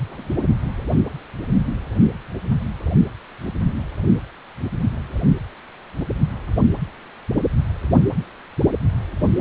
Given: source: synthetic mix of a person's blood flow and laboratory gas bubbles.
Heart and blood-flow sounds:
Doppler ultrasound of blood flow; precordium
0.09-0.30 s: bubbles
From the record:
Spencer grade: 1 (occasional bubble signal discernible with the cardiac motion signal, with majority of cardiac periods free of bubbles); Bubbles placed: anywhere in the cardiac cycle

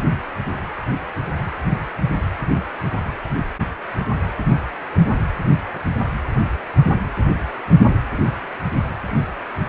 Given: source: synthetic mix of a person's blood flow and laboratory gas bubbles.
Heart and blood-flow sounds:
Doppler ultrasound of blood flow; precordium
no bubbles
From the record:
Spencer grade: 0 (complete lack of bubble signals)

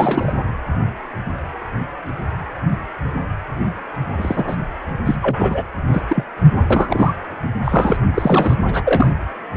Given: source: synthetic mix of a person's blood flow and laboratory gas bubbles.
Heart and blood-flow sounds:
Doppler ultrasound of blood flow; precordium
0.00-0.33 s: bubbles
4.17-4.56 s: bubbles
5.05-5.16 s: bubbles
5.21-5.65 s: bubbles
5.92-6.02 s: bubbles
6.08-6.24 s: bubbles
6.70-7.13 s: bubbles
7.64-7.97 s: bubbles
8.13-8.56 s: bubbles
8.66-9.13 s: bubbles
From the record:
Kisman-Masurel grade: 232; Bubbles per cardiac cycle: several, 3 to 8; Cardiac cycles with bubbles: 50 to 99%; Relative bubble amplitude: moderate (0.250 to 0.450); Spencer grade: 3 (all of the cardiac periods contain showers or single bubble signals, but not dominating or overriding the cardiac motion signals); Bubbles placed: anywhere in the cardiac cycle

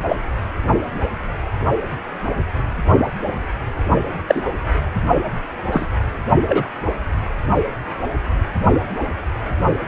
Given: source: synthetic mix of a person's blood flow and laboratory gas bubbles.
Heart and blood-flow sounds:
Doppler ultrasound of blood flow; precordium
0.09-0.19 s: bubbles
4.28-4.42 s: bubbles
5.72-5.88 s: bubbles
6.49-6.63 s: bubbles
From the record:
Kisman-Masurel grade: 123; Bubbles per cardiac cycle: 1 to 2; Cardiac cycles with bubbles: 10 to 50%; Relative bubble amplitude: loud (0.450 to 0.775); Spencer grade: 2 (many but less than half of the cardiac periods contain bubble signals, singularly or in groups); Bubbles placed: only in the low amplitude regions of the cardiac cycle

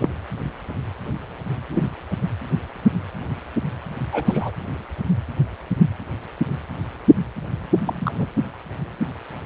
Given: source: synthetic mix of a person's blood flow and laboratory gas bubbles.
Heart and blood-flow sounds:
Doppler ultrasound of blood flow; precordium
0.00-0.09 s: bubbles
1.74-1.83 s: bubbles
4.12-4.51 s: bubbles
7.85-8.10 s: bubbles
8.14-8.27 s: bubbles
From the record:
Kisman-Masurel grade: 122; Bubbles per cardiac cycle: 1 to 2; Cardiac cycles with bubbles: 10 to 50%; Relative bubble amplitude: moderate (0.250 to 0.450); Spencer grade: 2 (many but less than half of the cardiac periods contain bubble signals, singularly or in groups); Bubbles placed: anywhere in the cardiac cycle

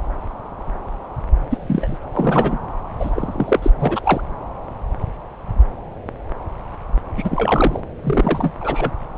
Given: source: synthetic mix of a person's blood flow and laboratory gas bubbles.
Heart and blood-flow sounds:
Doppler ultrasound of blood flow; subclavian vein
1.50-1.99 s: bubbles
2.13-2.59 s: bubbles
3.00-3.60 s: bubbles
3.62-3.70 s: bubbles
3.79-4.01 s: bubbles
4.04-4.21 s: bubbles
7.17-7.80 s: bubbles
8.04-8.52 s: bubbles
8.60-8.91 s: bubbles
From the record:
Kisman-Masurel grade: 222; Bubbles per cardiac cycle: several, 3 to 8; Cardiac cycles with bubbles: 10 to 50%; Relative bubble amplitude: moderate (0.250 to 0.450); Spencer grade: 2 (many but less than half of the cardiac periods contain bubble signals, singularly or in groups); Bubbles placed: anywhere in the cardiac cycle

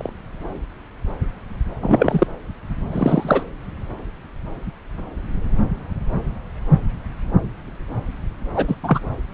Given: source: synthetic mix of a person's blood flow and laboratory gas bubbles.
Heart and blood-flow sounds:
Doppler ultrasound of blood flow; subclavian vein
0.00-0.10 s: bubbles
1.82-2.27 s: bubbles
2.92-3.43 s: bubbles
8.54-8.76 s: bubbles
8.83-8.99 s: bubbles
From the record:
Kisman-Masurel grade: 223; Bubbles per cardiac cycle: several, 3 to 8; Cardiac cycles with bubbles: 10 to 50%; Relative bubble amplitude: loud (0.450 to 0.775); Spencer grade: 2 (many but less than half of the cardiac periods contain bubble signals, singularly or in groups); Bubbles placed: anywhere in the cardiac cycle

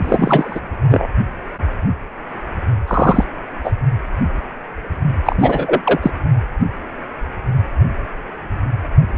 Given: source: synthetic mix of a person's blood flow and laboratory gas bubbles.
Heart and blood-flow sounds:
Doppler ultrasound of blood flow; precordium
0.02-0.60 s: bubbles
0.90-1.07 s: bubbles
2.88-3.25 s: bubbles
3.64-3.72 s: bubbles
5.25-5.81 s: bubbles
5.84-5.99 s: bubbles
6.02-6.11 s: bubbles
From the record:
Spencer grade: 2 (many but less than half of the cardiac periods contain bubble signals, singularly or in groups); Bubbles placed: only in the low amplitude regions of the cardiac cycle

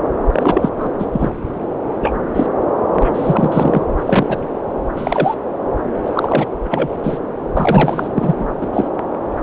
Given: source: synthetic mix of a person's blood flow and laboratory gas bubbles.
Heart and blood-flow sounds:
Doppler ultrasound of blood flow; subclavian vein
0.32-0.69 s: bubbles
0.78-0.87 s: bubbles
0.99-1.05 s: bubbles
1.12-1.31 s: bubbles
2.01-2.12 s: bubbles
2.34-2.47 s: bubbles
2.93-3.81 s: bubbles
4.06-4.48 s: bubbles
4.96-5.35 s: bubbles
6.05-6.11 s: bubbles
6.13-6.46 s: bubbles
6.65-6.88 s: bubbles
7.03-7.19 s: bubbles
7.57-8.08 s: bubbles
8.15-8.35 s: bubbles
8.39-8.44 s: bubbles
8.61-8.70 s: bubbles
8.73-8.88 s: bubbles
From the record:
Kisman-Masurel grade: 233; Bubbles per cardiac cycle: several, 3 to 8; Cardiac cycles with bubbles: 50 to 99%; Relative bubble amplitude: loud (0.450 to 0.775); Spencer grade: 3 (all of the cardiac periods contain showers or single bubble signals, but not dominating or overriding the cardiac motion signals); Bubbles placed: anywhere in the cardiac cycle

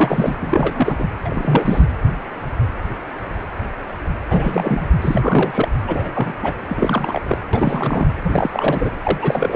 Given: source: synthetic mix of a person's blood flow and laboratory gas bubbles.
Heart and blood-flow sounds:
Doppler ultrasound of blood flow; precordium
0.00-0.36 s: bubbles
0.42-1.05 s: bubbles
1.25-1.84 s: bubbles
4.29-4.88 s: bubbles
5.02-5.68 s: bubbles
5.87-6.12 s: bubbles
6.15-6.33 s: bubbles
6.42-6.53 s: bubbles
6.69-7.38 s: bubbles
7.53-8.08 s: bubbles
8.23-8.91 s: bubbles
9.03-9.18 s: bubbles
9.21-9.56 s: bubbles
From the record:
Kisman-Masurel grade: 333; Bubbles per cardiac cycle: rolling drumbeat, 9 or more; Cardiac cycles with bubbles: 50 to 99%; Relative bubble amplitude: loud (0.450 to 0.775); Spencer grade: 3 (all of the cardiac periods contain showers or single bubble signals, but not dominating or overriding the cardiac motion signals); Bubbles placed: anywhere in the cardiac cycle

